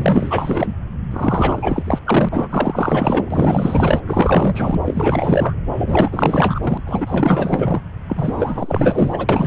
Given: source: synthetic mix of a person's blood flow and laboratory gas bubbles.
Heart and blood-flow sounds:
Doppler ultrasound of blood flow; subclavian vein
0.00-0.75 s: bubbles
1.10-1.99 s: bubbles
2.06-2.47 s: bubbles
2.50-4.00 s: bubbles
4.07-4.81 s: bubbles
4.85-5.54 s: bubbles
5.77-6.81 s: bubbles
6.86-7.80 s: bubbles
8.08-9.47 s: bubbles
From the record:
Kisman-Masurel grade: 444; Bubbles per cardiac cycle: continuous sound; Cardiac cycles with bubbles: 100%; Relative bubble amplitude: maximal (0.775 to 0.999); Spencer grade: 4 (maximum detectable bubble signal sounding continuously throughout systole and diastole of every cardiac period, and overriding the amplitude of the normal cardiac signals); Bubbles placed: anywhere in the cardiac cycle

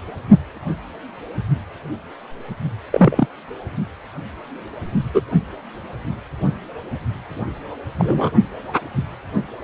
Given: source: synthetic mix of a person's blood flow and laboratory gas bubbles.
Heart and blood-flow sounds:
Doppler ultrasound of blood flow; precordium
2.92-3.26 s: bubbles
5.13-5.21 s: bubbles
7.97-8.30 s: bubbles
From the record:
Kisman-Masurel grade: 123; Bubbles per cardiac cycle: 1 to 2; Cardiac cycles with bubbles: 10 to 50%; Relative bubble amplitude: loud (0.450 to 0.775); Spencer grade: 2 (many but less than half of the cardiac periods contain bubble signals, singularly or in groups); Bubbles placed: only in the low amplitude regions of the cardiac cycle

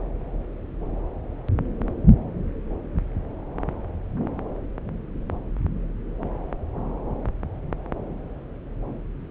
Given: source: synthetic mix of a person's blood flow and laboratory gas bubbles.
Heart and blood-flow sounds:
Doppler ultrasound of blood flow; subclavian vein
no bubbles
From the record:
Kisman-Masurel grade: 000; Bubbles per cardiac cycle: 0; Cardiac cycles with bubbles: 0%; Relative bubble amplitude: no bubbles discernible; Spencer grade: 0 (complete lack of bubble signals)

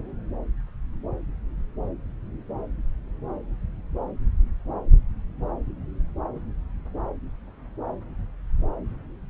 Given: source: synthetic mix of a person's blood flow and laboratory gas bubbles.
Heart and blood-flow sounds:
Doppler ultrasound of blood flow; subclavian vein
no bubbles
From the record:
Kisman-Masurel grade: 000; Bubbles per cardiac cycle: 0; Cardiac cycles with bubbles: 0%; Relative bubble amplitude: no bubbles discernible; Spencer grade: 0 (complete lack of bubble signals)

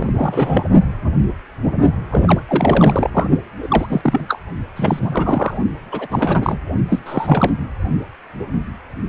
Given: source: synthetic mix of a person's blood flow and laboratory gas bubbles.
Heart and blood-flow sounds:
Doppler ultrasound of blood flow; precordium
0.00-0.65 s: bubbles
2.11-2.40 s: bubbles
2.48-3.29 s: bubbles
3.62-3.86 s: bubbles
3.89-4.25 s: bubbles
4.28-4.39 s: bubbles
4.76-5.57 s: bubbles
5.92-6.58 s: bubbles
6.90-6.99 s: bubbles
7.06-7.52 s: bubbles
From the record:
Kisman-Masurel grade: 333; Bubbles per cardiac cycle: rolling drumbeat, 9 or more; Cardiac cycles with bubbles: 50 to 99%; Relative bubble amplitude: loud (0.450 to 0.775); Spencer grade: 3 (all of the cardiac periods contain showers or single bubble signals, but not dominating or overriding the cardiac motion signals); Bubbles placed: only in the low amplitude regions of the cardiac cycle

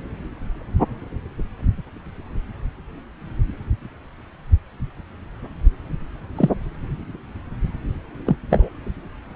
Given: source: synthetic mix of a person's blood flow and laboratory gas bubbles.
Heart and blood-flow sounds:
Doppler ultrasound of blood flow; subclavian vein
6.37-6.50 s: bubbles
8.26-8.36 s: bubbles
8.50-8.70 s: bubbles
From the record:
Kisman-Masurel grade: 123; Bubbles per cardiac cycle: 1 to 2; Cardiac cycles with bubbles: 10 to 50%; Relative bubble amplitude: loud (0.450 to 0.775); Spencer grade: 2 (many but less than half of the cardiac periods contain bubble signals, singularly or in groups); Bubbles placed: anywhere in the cardiac cycle

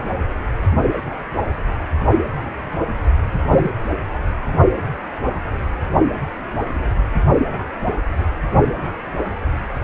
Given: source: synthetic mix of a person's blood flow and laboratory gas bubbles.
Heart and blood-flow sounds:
Doppler ultrasound of blood flow; precordium
3.48-3.69 s: bubbles
From the record:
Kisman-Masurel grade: 112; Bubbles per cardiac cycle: 1 to 2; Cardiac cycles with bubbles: 1 to 10%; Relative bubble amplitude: moderate (0.250 to 0.450); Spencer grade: 1 (occasional bubble signal discernible with the cardiac motion signal, with majority of cardiac periods free of bubbles); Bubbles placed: anywhere in the cardiac cycle

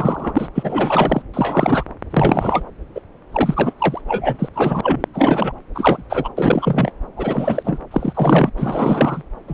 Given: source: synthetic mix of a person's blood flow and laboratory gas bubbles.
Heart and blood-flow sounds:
Doppler ultrasound of blood flow; subclavian vein
0.00-0.48 s: bubbles
0.55-1.22 s: bubbles
1.33-1.84 s: bubbles
2.10-2.65 s: bubbles
2.95-3.00 s: bubbles
3.33-3.73 s: bubbles
3.79-4.01 s: bubbles
4.08-4.49 s: bubbles
4.54-5.04 s: bubbles
5.13-5.52 s: bubbles
5.75-6.02 s: bubbles
6.09-6.29 s: bubbles
6.37-6.93 s: bubbles
7.16-7.80 s: bubbles
7.90-8.50 s: bubbles
8.57-9.22 s: bubbles
9.48-9.54 s: bubbles
From the record:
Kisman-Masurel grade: 343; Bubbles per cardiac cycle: rolling drumbeat, 9 or more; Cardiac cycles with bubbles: 100%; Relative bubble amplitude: loud (0.450 to 0.775); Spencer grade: 3 (all of the cardiac periods contain showers or single bubble signals, but not dominating or overriding the cardiac motion signals); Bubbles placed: anywhere in the cardiac cycle

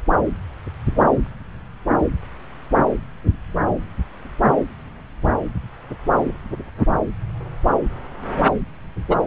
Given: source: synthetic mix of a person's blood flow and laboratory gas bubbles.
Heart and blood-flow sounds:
Doppler ultrasound of blood flow; subclavian vein
9.10-9.15 s: bubbles
From the record:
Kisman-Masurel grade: 113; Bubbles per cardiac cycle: 1 to 2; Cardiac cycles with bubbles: 1 to 10%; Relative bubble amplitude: loud (0.450 to 0.775); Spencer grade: 1 (occasional bubble signal discernible with the cardiac motion signal, with majority of cardiac periods free of bubbles); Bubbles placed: anywhere in the cardiac cycle

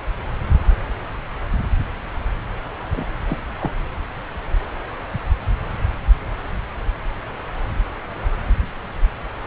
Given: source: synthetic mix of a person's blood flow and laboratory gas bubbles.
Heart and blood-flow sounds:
Doppler ultrasound of blood flow; subclavian vein
2.92-3.05 s: bubbles
3.27-3.38 s: bubbles
3.60-3.72 s: bubbles
From the record:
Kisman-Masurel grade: 121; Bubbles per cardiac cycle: 1 to 2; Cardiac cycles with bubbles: 10 to 50%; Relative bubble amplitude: barely perceptible (0.100 to 0.250); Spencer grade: 2 (many but less than half of the cardiac periods contain bubble signals, singularly or in groups); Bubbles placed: anywhere in the cardiac cycle

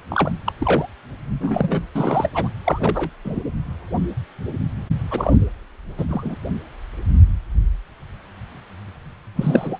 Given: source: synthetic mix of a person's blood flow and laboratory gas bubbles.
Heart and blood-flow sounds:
Doppler ultrasound of blood flow; precordium
0.09-0.31 s: bubbles
0.46-0.52 s: bubbles
0.58-0.89 s: bubbles
1.41-1.81 s: bubbles
1.95-2.29 s: bubbles
2.34-2.48 s: bubbles
2.64-3.10 s: bubbles
3.25-3.40 s: bubbles
5.10-5.36 s: bubbles
5.97-6.05 s: bubbles
6.09-6.36 s: bubbles
9.36-9.78 s: bubbles
From the record:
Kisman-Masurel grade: 232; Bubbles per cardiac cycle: several, 3 to 8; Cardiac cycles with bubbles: 50 to 99%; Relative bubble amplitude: moderate (0.250 to 0.450); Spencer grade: 3 (all of the cardiac periods contain showers or single bubble signals, but not dominating or overriding the cardiac motion signals); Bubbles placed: anywhere in the cardiac cycle

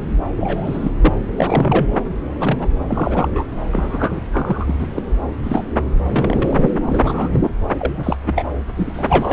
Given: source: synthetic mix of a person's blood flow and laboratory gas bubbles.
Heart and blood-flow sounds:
Doppler ultrasound of blood flow; subclavian vein
0.36-0.92 s: bubbles
1.02-1.13 s: bubbles
1.36-1.94 s: bubbles
2.41-2.67 s: bubbles
2.90-3.28 s: bubbles
3.31-3.44 s: bubbles
3.71-4.21 s: bubbles
4.32-4.75 s: bubbles
4.79-4.87 s: bubbles
4.96-5.03 s: bubbles
5.43-5.65 s: bubbles
6.06-6.71 s: bubbles
6.86-7.29 s: bubbles
7.33-7.40 s: bubbles
7.42-7.51 s: bubbles
7.78-8.16 s: bubbles
8.26-8.43 s: bubbles
8.75-9.33 s: bubbles
From the record:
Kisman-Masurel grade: 242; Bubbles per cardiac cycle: several, 3 to 8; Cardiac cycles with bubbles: 100%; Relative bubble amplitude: moderate (0.250 to 0.450); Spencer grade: 3 (all of the cardiac periods contain showers or single bubble signals, but not dominating or overriding the cardiac motion signals); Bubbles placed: anywhere in the cardiac cycle

